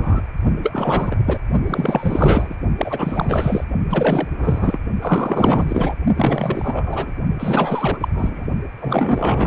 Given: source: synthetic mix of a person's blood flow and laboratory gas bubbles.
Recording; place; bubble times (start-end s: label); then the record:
Doppler ultrasound of blood flow; precordium
0.00-0.21 s: bubbles
0.62-1.19 s: bubbles
1.24-1.39 s: bubbles
1.66-2.56 s: bubbles
2.77-3.65 s: bubbles
3.89-4.28 s: bubbles
4.38-4.79 s: bubbles
5.01-5.96 s: bubbles
6.15-7.12 s: bubbles
7.38-8.09 s: bubbles
8.14-8.46 s: bubbles
8.79-9.47 s: bubbles
From the record:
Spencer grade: 4 (maximum detectable bubble signal sounding continuously throughout systole and diastole of every cardiac period, and overriding the amplitude of the normal cardiac signals); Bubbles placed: only in the low amplitude regions of the cardiac cycle